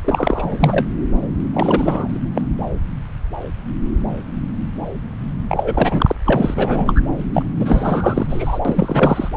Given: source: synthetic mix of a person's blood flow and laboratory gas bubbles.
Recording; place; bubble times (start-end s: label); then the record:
Doppler ultrasound of blood flow; subclavian vein
0.04-0.86 s: bubbles
1.53-2.21 s: bubbles
2.34-2.42 s: bubbles
5.48-6.15 s: bubbles
6.25-7.01 s: bubbles
7.33-7.42 s: bubbles
7.58-8.59 s: bubbles
8.64-9.29 s: bubbles
From the record:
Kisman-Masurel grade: 333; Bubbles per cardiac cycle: rolling drumbeat, 9 or more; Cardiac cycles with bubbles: 50 to 99%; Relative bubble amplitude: loud (0.450 to 0.775); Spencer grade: 3 (all of the cardiac periods contain showers or single bubble signals, but not dominating or overriding the cardiac motion signals); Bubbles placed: anywhere in the cardiac cycle